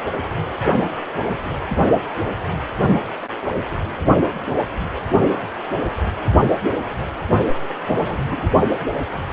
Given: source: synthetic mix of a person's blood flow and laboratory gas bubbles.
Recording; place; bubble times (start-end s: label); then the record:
Doppler ultrasound of blood flow; precordium
7.79-8.19 s: bubbles
8.28-8.49 s: bubbles
From the record:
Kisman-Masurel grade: 211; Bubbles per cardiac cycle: several, 3 to 8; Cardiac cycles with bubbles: 1 to 10%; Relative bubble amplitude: barely perceptible (0.100 to 0.250); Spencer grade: 1 (occasional bubble signal discernible with the cardiac motion signal, with majority of cardiac periods free of bubbles); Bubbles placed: only in the low amplitude regions of the cardiac cycle